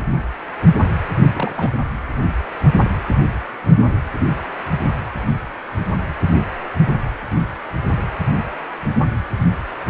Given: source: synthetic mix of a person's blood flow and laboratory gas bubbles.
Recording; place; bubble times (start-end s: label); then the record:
Doppler ultrasound of blood flow; precordium
1.33-1.78 s: bubbles
From the record:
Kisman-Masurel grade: 211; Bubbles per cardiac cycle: several, 3 to 8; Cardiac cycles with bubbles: 1 to 10%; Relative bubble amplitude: barely perceptible (0.100 to 0.250); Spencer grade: 1 (occasional bubble signal discernible with the cardiac motion signal, with majority of cardiac periods free of bubbles); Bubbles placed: anywhere in the cardiac cycle